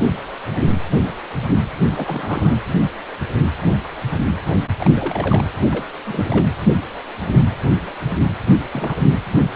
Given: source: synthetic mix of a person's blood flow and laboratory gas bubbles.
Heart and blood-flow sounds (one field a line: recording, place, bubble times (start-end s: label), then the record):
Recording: Doppler ultrasound of blood flow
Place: precordium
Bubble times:
1.95-2.57 s: bubbles
4.79-5.44 s: bubbles
5.72-5.86 s: bubbles
6.05-6.44 s: bubbles
8.72-9.06 s: bubbles
From the record:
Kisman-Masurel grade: 221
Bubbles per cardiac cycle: several, 3 to 8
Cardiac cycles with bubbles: 10 to 50%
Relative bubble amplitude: barely perceptible (0.100 to 0.250)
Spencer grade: 2 (many but less than half of the cardiac periods contain bubble signals, singularly or in groups)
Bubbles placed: anywhere in the cardiac cycle